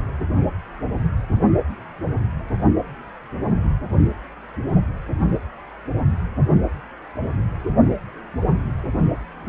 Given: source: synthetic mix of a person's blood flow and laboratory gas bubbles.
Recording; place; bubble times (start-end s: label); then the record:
Doppler ultrasound of blood flow; precordium
no bubbles
From the record:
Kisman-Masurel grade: 000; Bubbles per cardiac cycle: 0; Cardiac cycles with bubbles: 0%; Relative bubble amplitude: no bubbles discernible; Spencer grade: 0 (complete lack of bubble signals)